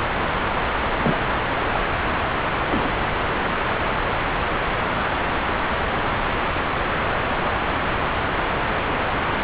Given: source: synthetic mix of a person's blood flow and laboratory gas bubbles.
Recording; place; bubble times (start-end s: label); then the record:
Doppler ultrasound of blood flow; subclavian vein
1.03-1.19 s: bubbles
1.73-1.81 s: bubbles
2.69-2.90 s: bubbles
From the record:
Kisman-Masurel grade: 122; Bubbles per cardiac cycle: 1 to 2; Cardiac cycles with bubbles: 10 to 50%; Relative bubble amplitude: moderate (0.250 to 0.450); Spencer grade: 2 (many but less than half of the cardiac periods contain bubble signals, singularly or in groups); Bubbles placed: anywhere in the cardiac cycle